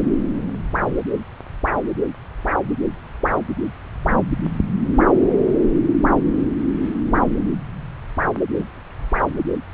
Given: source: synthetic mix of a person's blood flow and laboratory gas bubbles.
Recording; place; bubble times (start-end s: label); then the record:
Doppler ultrasound of blood flow; subclavian vein
8.54-8.65 s: bubbles
From the record:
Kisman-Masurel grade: 112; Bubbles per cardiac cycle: 1 to 2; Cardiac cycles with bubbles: 1 to 10%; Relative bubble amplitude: moderate (0.250 to 0.450); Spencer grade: 1 (occasional bubble signal discernible with the cardiac motion signal, with majority of cardiac periods free of bubbles); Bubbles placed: anywhere in the cardiac cycle